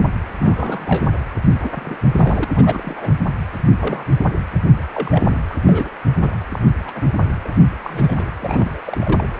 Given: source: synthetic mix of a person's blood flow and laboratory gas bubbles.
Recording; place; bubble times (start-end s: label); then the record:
Doppler ultrasound of blood flow; precordium
0.39-1.13 s: bubbles
1.63-1.72 s: bubbles
1.75-1.99 s: bubbles
2.15-2.45 s: bubbles
2.50-3.13 s: bubbles
3.80-4.04 s: bubbles
4.94-5.38 s: bubbles
5.49-5.57 s: bubbles
5.65-5.89 s: bubbles
6.20-6.38 s: bubbles
6.52-6.59 s: bubbles
6.84-7.08 s: bubbles
7.44-7.48 s: bubbles
7.84-8.33 s: bubbles
8.40-8.80 s: bubbles
8.86-9.25 s: bubbles
From the record:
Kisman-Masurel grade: 242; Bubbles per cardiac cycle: several, 3 to 8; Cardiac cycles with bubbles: 100%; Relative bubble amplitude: moderate (0.250 to 0.450); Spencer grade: 3 (all of the cardiac periods contain showers or single bubble signals, but not dominating or overriding the cardiac motion signals); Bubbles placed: anywhere in the cardiac cycle